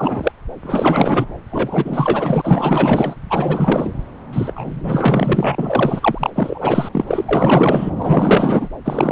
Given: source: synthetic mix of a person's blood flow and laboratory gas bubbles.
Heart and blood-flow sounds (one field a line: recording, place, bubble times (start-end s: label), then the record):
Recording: Doppler ultrasound of blood flow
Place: subclavian vein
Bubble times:
0.00-0.32 s: bubbles
0.63-1.27 s: bubbles
1.50-3.15 s: bubbles
3.29-3.92 s: bubbles
4.33-4.53 s: bubbles
4.55-6.30 s: bubbles
6.35-6.89 s: bubbles
6.92-7.04 s: bubbles
7.07-7.25 s: bubbles
7.29-7.91 s: bubbles
7.96-8.68 s: bubbles
8.84-9.11 s: bubbles
From the record:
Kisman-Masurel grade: 444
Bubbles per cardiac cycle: continuous sound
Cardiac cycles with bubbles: 100%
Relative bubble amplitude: maximal (0.775 to 0.999)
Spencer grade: 4 (maximum detectable bubble signal sounding continuously throughout systole and diastole of every cardiac period, and overriding the amplitude of the normal cardiac signals)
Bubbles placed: anywhere in the cardiac cycle